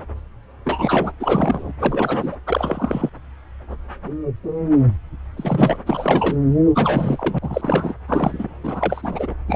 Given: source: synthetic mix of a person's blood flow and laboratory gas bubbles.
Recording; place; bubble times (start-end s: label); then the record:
Doppler ultrasound of blood flow; subclavian vein
0.65-1.11 s: bubbles
1.20-1.72 s: bubbles
1.79-2.36 s: bubbles
2.47-3.10 s: bubbles
5.37-5.83 s: bubbles
5.86-6.37 s: bubbles
6.74-7.38 s: bubbles
7.42-7.95 s: bubbles
8.07-8.47 s: bubbles
8.63-9.34 s: bubbles
9.47-9.56 s: bubbles
From the record:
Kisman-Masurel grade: 332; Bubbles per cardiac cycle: rolling drumbeat, 9 or more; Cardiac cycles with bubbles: 50 to 99%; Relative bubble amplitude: moderate (0.250 to 0.450); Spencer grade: 3 (all of the cardiac periods contain showers or single bubble signals, but not dominating or overriding the cardiac motion signals); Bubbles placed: anywhere in the cardiac cycle